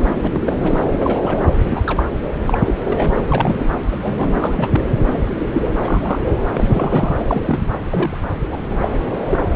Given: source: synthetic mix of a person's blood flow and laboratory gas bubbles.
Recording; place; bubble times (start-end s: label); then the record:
Doppler ultrasound of blood flow; subclavian vein
0.22-0.41 s: bubbles
0.45-0.56 s: bubbles
0.62-0.81 s: bubbles
0.91-1.41 s: bubbles
1.69-1.81 s: bubbles
1.86-2.05 s: bubbles
2.46-2.59 s: bubbles
2.65-2.75 s: bubbles
2.84-3.12 s: bubbles
3.28-3.65 s: bubbles
3.91-3.96 s: bubbles
4.01-4.83 s: bubbles
5.10-5.70 s: bubbles
5.76-6.19 s: bubbles
6.30-6.36 s: bubbles
6.54-7.13 s: bubbles
7.18-7.42 s: bubbles
7.44-7.72 s: bubbles
7.90-8.17 s: bubbles
8.41-8.49 s: bubbles
8.52-8.57 s: bubbles
8.69-8.89 s: bubbles
9.26-9.49 s: bubbles
From the record:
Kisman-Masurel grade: 242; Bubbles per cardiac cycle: several, 3 to 8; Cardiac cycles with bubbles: 100%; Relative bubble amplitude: moderate (0.250 to 0.450); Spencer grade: 3 (all of the cardiac periods contain showers or single bubble signals, but not dominating or overriding the cardiac motion signals); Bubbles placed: anywhere in the cardiac cycle